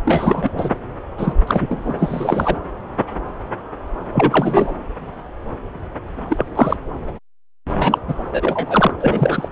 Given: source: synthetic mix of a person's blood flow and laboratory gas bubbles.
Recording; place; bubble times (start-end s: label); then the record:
Doppler ultrasound of blood flow; subclavian vein
0.05-0.50 s: bubbles
0.57-0.70 s: bubbles
1.18-1.33 s: bubbles
1.47-2.60 s: bubbles
4.12-4.73 s: bubbles
6.29-6.46 s: bubbles
6.55-6.77 s: bubbles
7.76-7.98 s: bubbles
8.08-8.14 s: bubbles
8.32-8.92 s: bubbles
8.99-9.48 s: bubbles
From the record:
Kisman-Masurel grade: 233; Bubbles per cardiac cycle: several, 3 to 8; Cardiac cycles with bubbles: 50 to 99%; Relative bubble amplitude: loud (0.450 to 0.775); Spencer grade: 3 (all of the cardiac periods contain showers or single bubble signals, but not dominating or overriding the cardiac motion signals); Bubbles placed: anywhere in the cardiac cycle